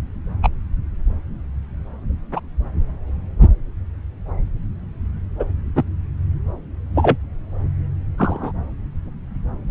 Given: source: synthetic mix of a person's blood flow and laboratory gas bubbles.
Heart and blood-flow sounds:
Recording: Doppler ultrasound of blood flow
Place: subclavian vein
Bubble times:
0.43-0.49 s: bubbles
2.36-2.40 s: bubbles
5.39-5.45 s: bubbles
5.75-5.83 s: bubbles
6.95-7.17 s: bubbles
8.18-8.52 s: bubbles
From the record:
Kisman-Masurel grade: 123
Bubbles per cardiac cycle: 1 to 2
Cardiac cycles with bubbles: 10 to 50%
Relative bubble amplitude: loud (0.450 to 0.775)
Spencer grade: 2 (many but less than half of the cardiac periods contain bubble signals, singularly or in groups)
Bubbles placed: anywhere in the cardiac cycle

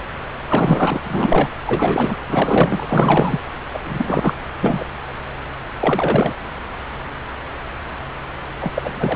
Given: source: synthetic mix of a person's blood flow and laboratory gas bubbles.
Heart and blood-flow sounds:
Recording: Doppler ultrasound of blood flow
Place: subclavian vein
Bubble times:
0.48-1.49 s: bubbles
1.67-2.17 s: bubbles
2.29-3.41 s: bubbles
3.73-3.79 s: bubbles
3.85-4.33 s: bubbles
4.62-4.86 s: bubbles
5.80-6.34 s: bubbles
8.61-8.73 s: bubbles
8.75-8.92 s: bubbles
8.95-9.16 s: bubbles
From the record:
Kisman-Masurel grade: 333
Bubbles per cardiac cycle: rolling drumbeat, 9 or more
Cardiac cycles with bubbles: 50 to 99%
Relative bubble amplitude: loud (0.450 to 0.775)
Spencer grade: 3 (all of the cardiac periods contain showers or single bubble signals, but not dominating or overriding the cardiac motion signals)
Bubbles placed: anywhere in the cardiac cycle

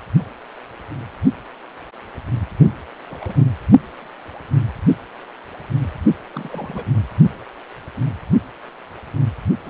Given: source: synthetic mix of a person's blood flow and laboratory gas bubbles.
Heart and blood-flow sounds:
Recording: Doppler ultrasound of blood flow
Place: precordium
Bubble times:
2.58-2.64 s: bubbles
3.10-3.45 s: bubbles
6.31-6.90 s: bubbles
9.66-9.70 s: bubbles
From the record:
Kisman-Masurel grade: 221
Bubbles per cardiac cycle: several, 3 to 8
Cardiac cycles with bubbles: 10 to 50%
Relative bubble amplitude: barely perceptible (0.100 to 0.250)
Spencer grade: 2 (many but less than half of the cardiac periods contain bubble signals, singularly or in groups)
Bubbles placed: only in the low amplitude regions of the cardiac cycle

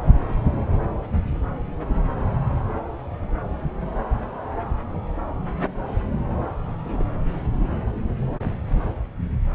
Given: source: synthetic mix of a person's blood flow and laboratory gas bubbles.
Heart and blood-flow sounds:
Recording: Doppler ultrasound of blood flow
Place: subclavian vein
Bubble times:
6.85-7.03 s: bubbles
From the record:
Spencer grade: 1 (occasional bubble signal discernible with the cardiac motion signal, with majority of cardiac periods free of bubbles)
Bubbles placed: anywhere in the cardiac cycle

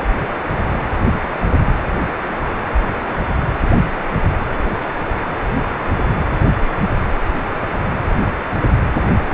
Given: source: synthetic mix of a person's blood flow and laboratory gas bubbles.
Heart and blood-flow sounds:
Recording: Doppler ultrasound of blood flow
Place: precordium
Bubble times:
9.29-9.34 s: bubbles
From the record:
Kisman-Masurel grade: 213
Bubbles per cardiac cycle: several, 3 to 8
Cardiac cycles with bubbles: 1 to 10%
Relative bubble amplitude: loud (0.450 to 0.775)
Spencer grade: 1 (occasional bubble signal discernible with the cardiac motion signal, with majority of cardiac periods free of bubbles)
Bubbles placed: anywhere in the cardiac cycle

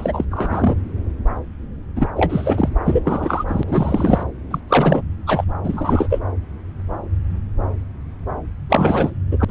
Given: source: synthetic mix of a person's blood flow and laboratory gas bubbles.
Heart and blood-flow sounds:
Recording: Doppler ultrasound of blood flow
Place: subclavian vein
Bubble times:
0.00-0.25 s: bubbles
0.30-0.75 s: bubbles
1.95-2.08 s: bubbles
2.16-2.69 s: bubbles
2.85-3.44 s: bubbles
3.47-3.64 s: bubbles
3.67-4.23 s: bubbles
4.50-4.59 s: bubbles
4.68-5.02 s: bubbles
5.26-5.44 s: bubbles
5.64-6.20 s: bubbles
8.69-9.10 s: bubbles
9.30-9.45 s: bubbles
9.47-9.51 s: bubbles
From the record:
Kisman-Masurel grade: 333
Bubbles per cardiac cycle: rolling drumbeat, 9 or more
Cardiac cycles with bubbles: 50 to 99%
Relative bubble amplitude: loud (0.450 to 0.775)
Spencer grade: 3 (all of the cardiac periods contain showers or single bubble signals, but not dominating or overriding the cardiac motion signals)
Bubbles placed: anywhere in the cardiac cycle

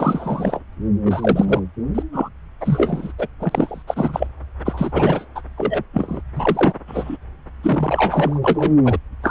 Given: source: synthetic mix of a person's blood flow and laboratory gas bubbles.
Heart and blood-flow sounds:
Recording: Doppler ultrasound of blood flow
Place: subclavian vein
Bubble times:
0.00-0.60 s: bubbles
1.05-1.61 s: bubbles
1.94-2.02 s: bubbles
2.12-2.29 s: bubbles
2.60-3.12 s: bubbles
3.19-3.27 s: bubbles
3.40-3.83 s: bubbles
3.87-4.27 s: bubbles
4.64-5.25 s: bubbles
5.35-5.42 s: bubbles
5.57-5.83 s: bubbles
5.93-6.21 s: bubbles
6.35-6.74 s: bubbles
6.88-7.17 s: bubbles
7.63-8.73 s: bubbles
8.85-8.97 s: bubbles
9.23-9.31 s: bubbles
From the record:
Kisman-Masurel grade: 342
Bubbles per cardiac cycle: rolling drumbeat, 9 or more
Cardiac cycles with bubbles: 100%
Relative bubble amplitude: moderate (0.250 to 0.450)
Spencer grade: 3 (all of the cardiac periods contain showers or single bubble signals, but not dominating or overriding the cardiac motion signals)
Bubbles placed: anywhere in the cardiac cycle

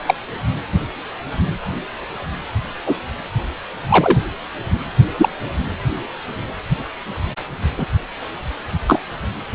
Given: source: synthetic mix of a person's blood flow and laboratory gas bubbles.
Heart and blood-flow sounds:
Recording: Doppler ultrasound of blood flow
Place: precordium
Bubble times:
0.05-0.14 s: bubbles
2.86-2.96 s: bubbles
3.88-4.19 s: bubbles
5.17-5.29 s: bubbles
7.76-7.87 s: bubbles
8.87-9.02 s: bubbles
From the record:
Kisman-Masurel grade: 123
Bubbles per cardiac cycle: 1 to 2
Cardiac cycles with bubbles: 10 to 50%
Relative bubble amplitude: loud (0.450 to 0.775)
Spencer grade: 2 (many but less than half of the cardiac periods contain bubble signals, singularly or in groups)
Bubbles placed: anywhere in the cardiac cycle

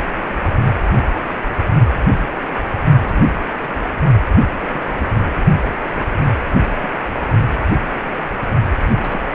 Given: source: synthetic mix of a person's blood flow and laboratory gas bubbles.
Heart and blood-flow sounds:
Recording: Doppler ultrasound of blood flow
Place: precordium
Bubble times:
3.00-3.43 s: bubbles
3.48-3.55 s: bubbles
3.58-3.68 s: bubbles
4.60-5.16 s: bubbles
5.24-5.42 s: bubbles
5.62-5.71 s: bubbles
5.94-6.15 s: bubbles
6.81-6.95 s: bubbles
8.87-9.28 s: bubbles
From the record:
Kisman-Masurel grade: 221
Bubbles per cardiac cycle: several, 3 to 8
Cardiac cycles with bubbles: 10 to 50%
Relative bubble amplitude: barely perceptible (0.100 to 0.250)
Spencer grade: 2 (many but less than half of the cardiac periods contain bubble signals, singularly or in groups)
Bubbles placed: only in the low amplitude regions of the cardiac cycle

